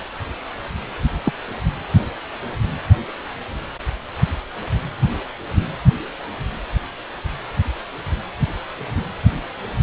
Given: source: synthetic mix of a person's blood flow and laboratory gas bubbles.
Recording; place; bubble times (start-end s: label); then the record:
Doppler ultrasound of blood flow; precordium
1.24-1.33 s: bubbles
From the record:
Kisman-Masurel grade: 112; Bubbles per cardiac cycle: 1 to 2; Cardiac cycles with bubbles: 1 to 10%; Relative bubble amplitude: moderate (0.250 to 0.450); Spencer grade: 1 (occasional bubble signal discernible with the cardiac motion signal, with majority of cardiac periods free of bubbles); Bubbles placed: anywhere in the cardiac cycle